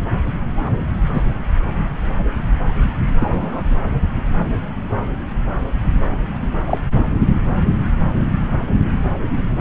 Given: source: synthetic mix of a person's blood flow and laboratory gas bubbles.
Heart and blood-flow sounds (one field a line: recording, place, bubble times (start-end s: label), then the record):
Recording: Doppler ultrasound of blood flow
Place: subclavian vein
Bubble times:
1.14-1.22 s: bubbles
3.19-3.62 s: bubbles
6.67-6.78 s: bubbles
6.90-7.07 s: bubbles
From the record:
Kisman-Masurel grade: 123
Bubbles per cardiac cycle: 1 to 2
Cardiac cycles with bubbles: 10 to 50%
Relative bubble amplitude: loud (0.450 to 0.775)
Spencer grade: 2 (many but less than half of the cardiac periods contain bubble signals, singularly or in groups)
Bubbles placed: anywhere in the cardiac cycle